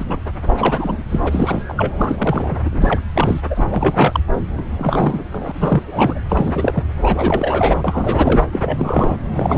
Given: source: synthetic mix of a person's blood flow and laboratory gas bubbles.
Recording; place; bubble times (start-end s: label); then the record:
Doppler ultrasound of blood flow; subclavian vein
0.00-0.20 s: bubbles
0.47-1.03 s: bubbles
1.09-1.62 s: bubbles
1.69-1.74 s: bubbles
1.77-1.92 s: bubbles
1.98-2.58 s: bubbles
2.65-3.00 s: bubbles
3.15-3.41 s: bubbles
3.50-4.20 s: bubbles
4.57-4.64 s: bubbles
4.78-5.23 s: bubbles
5.31-5.82 s: bubbles
5.87-6.19 s: bubbles
6.29-6.83 s: bubbles
7.02-8.44 s: bubbles
8.53-9.17 s: bubbles
9.34-9.58 s: bubbles
From the record:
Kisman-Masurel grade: 342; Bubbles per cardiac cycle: rolling drumbeat, 9 or more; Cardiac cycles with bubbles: 100%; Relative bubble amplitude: moderate (0.250 to 0.450); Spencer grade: 3 (all of the cardiac periods contain showers or single bubble signals, but not dominating or overriding the cardiac motion signals); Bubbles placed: anywhere in the cardiac cycle